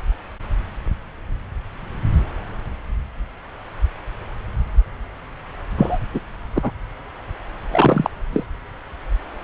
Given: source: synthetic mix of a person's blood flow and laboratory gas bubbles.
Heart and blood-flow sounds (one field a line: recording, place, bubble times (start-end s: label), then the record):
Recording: Doppler ultrasound of blood flow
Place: subclavian vein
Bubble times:
5.77-5.99 s: bubbles
6.13-6.20 s: bubbles
6.54-6.71 s: bubbles
7.72-8.10 s: bubbles
8.33-8.44 s: bubbles
From the record:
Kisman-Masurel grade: 223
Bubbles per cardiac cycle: several, 3 to 8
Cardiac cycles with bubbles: 10 to 50%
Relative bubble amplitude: loud (0.450 to 0.775)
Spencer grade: 2 (many but less than half of the cardiac periods contain bubble signals, singularly or in groups)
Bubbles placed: anywhere in the cardiac cycle